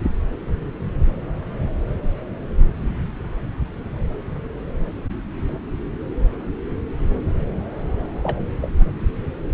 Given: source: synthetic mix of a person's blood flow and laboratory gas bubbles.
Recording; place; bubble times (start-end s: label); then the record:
Doppler ultrasound of blood flow; subclavian vein
8.23-8.38 s: bubbles
8.61-8.71 s: bubbles
From the record:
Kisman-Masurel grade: 212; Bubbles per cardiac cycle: several, 3 to 8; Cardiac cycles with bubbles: 1 to 10%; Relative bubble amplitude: moderate (0.250 to 0.450); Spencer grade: 1 (occasional bubble signal discernible with the cardiac motion signal, with majority of cardiac periods free of bubbles); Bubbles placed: anywhere in the cardiac cycle